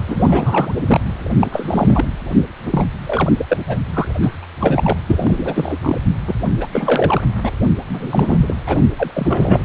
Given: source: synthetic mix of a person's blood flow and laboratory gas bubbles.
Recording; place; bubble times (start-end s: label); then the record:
Doppler ultrasound of blood flow; precordium
0.07-0.72 s: bubbles
0.86-1.00 s: bubbles
1.41-1.47 s: bubbles
1.50-2.05 s: bubbles
2.64-2.85 s: bubbles
3.06-3.33 s: bubbles
3.38-3.45 s: bubbles
3.48-3.58 s: bubbles
3.68-3.79 s: bubbles
3.94-4.05 s: bubbles
4.22-4.36 s: bubbles
4.42-4.46 s: bubbles
4.59-5.00 s: bubbles
5.06-5.79 s: bubbles
5.81-5.97 s: bubbles
6.27-6.35 s: bubbles
6.60-6.68 s: bubbles
6.72-7.21 s: bubbles
7.42-7.50 s: bubbles
7.88-8.38 s: bubbles
8.42-8.56 s: bubbles
8.66-8.85 s: bubbles
8.97-9.11 s: bubbles
9.14-9.63 s: bubbles
From the record:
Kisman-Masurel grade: 333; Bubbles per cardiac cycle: rolling drumbeat, 9 or more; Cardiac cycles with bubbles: 50 to 99%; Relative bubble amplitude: loud (0.450 to 0.775); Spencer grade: 3 (all of the cardiac periods contain showers or single bubble signals, but not dominating or overriding the cardiac motion signals); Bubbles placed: anywhere in the cardiac cycle